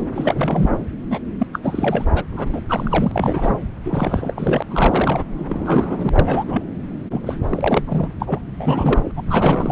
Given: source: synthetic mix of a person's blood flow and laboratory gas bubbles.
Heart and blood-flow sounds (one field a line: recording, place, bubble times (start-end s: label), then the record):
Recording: Doppler ultrasound of blood flow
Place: subclavian vein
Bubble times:
0.00-0.06 s: bubbles
0.15-0.71 s: bubbles
1.10-1.19 s: bubbles
1.39-1.46 s: bubbles
1.52-1.59 s: bubbles
1.62-2.05 s: bubbles
2.15-2.23 s: bubbles
2.31-2.60 s: bubbles
2.68-3.11 s: bubbles
3.15-3.54 s: bubbles
3.85-4.62 s: bubbles
4.70-5.24 s: bubbles
5.38-6.09 s: bubbles
6.12-6.64 s: bubbles
7.10-7.21 s: bubbles
7.26-7.34 s: bubbles
7.50-7.83 s: bubbles
7.87-8.09 s: bubbles
8.19-8.41 s: bubbles
8.56-9.12 s: bubbles
9.15-9.72 s: bubbles
From the record:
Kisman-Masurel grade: 333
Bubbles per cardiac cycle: rolling drumbeat, 9 or more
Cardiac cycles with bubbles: 50 to 99%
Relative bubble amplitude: loud (0.450 to 0.775)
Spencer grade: 3 (all of the cardiac periods contain showers or single bubble signals, but not dominating or overriding the cardiac motion signals)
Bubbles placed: anywhere in the cardiac cycle